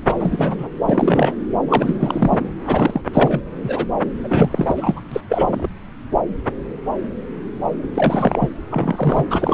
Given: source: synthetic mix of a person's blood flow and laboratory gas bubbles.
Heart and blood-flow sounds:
Doppler ultrasound of blood flow; subclavian vein
0.06-0.68 s: bubbles
0.85-1.34 s: bubbles
1.68-2.40 s: bubbles
2.67-3.01 s: bubbles
3.13-3.42 s: bubbles
3.63-3.86 s: bubbles
4.24-5.01 s: bubbles
5.12-5.21 s: bubbles
5.29-5.68 s: bubbles
7.93-8.49 s: bubbles
8.71-9.24 s: bubbles
9.29-9.53 s: bubbles
From the record:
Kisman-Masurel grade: 333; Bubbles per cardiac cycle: rolling drumbeat, 9 or more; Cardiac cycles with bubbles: 50 to 99%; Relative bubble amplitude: loud (0.450 to 0.775); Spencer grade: 3 (all of the cardiac periods contain showers or single bubble signals, but not dominating or overriding the cardiac motion signals); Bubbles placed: anywhere in the cardiac cycle

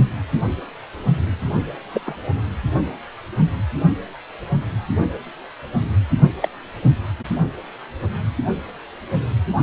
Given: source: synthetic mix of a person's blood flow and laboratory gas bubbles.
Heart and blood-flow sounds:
Doppler ultrasound of blood flow; precordium
1.93-2.00 s: bubbles
2.05-2.16 s: bubbles
6.42-6.49 s: bubbles
From the record:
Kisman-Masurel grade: 122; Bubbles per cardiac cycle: 1 to 2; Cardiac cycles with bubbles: 10 to 50%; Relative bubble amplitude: moderate (0.250 to 0.450); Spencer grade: 2 (many but less than half of the cardiac periods contain bubble signals, singularly or in groups); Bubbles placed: anywhere in the cardiac cycle

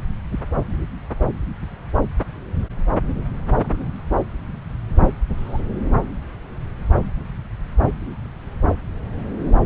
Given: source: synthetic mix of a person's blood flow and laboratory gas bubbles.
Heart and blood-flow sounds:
Doppler ultrasound of blood flow; subclavian vein
3.55-4.02 s: bubbles
5.37-5.62 s: bubbles
From the record:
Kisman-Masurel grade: 121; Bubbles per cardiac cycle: 1 to 2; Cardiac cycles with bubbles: 10 to 50%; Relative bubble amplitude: barely perceptible (0.100 to 0.250); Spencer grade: 2 (many but less than half of the cardiac periods contain bubble signals, singularly or in groups); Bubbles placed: anywhere in the cardiac cycle

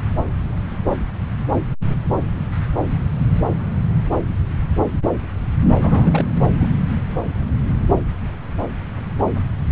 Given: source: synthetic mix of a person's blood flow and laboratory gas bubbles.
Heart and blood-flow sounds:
Doppler ultrasound of blood flow; subclavian vein
5.80-6.26 s: bubbles
6.60-6.68 s: bubbles
From the record:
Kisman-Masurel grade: 212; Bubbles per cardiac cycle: several, 3 to 8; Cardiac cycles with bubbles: 1 to 10%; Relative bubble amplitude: moderate (0.250 to 0.450); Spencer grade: 1 (occasional bubble signal discernible with the cardiac motion signal, with majority of cardiac periods free of bubbles); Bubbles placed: anywhere in the cardiac cycle

